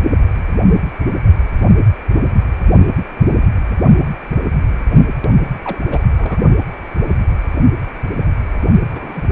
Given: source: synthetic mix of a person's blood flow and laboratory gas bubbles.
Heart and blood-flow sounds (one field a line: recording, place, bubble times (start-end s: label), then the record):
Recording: Doppler ultrasound of blood flow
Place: precordium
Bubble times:
5.62-5.79 s: bubbles
5.81-5.86 s: bubbles
5.90-6.03 s: bubbles
6.06-6.39 s: bubbles
8.92-9.23 s: bubbles
From the record:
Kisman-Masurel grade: 221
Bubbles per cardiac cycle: several, 3 to 8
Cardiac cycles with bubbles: 10 to 50%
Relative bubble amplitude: barely perceptible (0.100 to 0.250)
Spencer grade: 2 (many but less than half of the cardiac periods contain bubble signals, singularly or in groups)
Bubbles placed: only in the low amplitude regions of the cardiac cycle